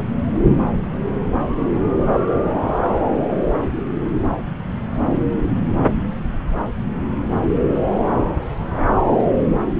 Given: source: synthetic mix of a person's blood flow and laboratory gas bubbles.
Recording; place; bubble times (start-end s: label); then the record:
Doppler ultrasound of blood flow; subclavian vein
no bubbles
From the record:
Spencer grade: 0 (complete lack of bubble signals)